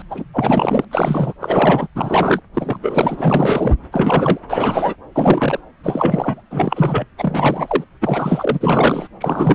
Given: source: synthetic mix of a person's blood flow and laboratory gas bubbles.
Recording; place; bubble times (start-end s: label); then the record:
Doppler ultrasound of blood flow; subclavian vein
0.00-0.02 s: bubbles
0.10-0.24 s: bubbles
0.33-0.85 s: bubbles
0.91-1.33 s: bubbles
1.41-1.87 s: bubbles
1.95-2.41 s: bubbles
2.54-2.77 s: bubbles
2.83-3.74 s: bubbles
3.92-4.38 s: bubbles
4.47-4.94 s: bubbles
5.14-5.59 s: bubbles
5.83-6.42 s: bubbles
6.50-7.05 s: bubbles
7.18-7.84 s: bubbles
8.01-9.08 s: bubbles
9.21-9.55 s: bubbles
From the record:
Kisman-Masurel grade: 343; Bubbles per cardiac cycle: rolling drumbeat, 9 or more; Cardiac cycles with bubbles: 100%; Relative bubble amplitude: loud (0.450 to 0.775); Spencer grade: 3 (all of the cardiac periods contain showers or single bubble signals, but not dominating or overriding the cardiac motion signals); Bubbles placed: anywhere in the cardiac cycle